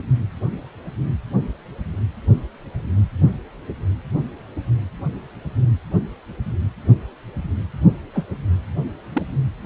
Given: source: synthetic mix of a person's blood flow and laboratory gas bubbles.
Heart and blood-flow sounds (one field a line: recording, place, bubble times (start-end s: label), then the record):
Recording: Doppler ultrasound of blood flow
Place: precordium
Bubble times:
8.13-8.24 s: bubbles
9.12-9.22 s: bubbles
From the record:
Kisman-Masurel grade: 112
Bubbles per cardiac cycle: 1 to 2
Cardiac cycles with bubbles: 1 to 10%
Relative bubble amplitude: moderate (0.250 to 0.450)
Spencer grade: 1 (occasional bubble signal discernible with the cardiac motion signal, with majority of cardiac periods free of bubbles)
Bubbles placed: only in the low amplitude regions of the cardiac cycle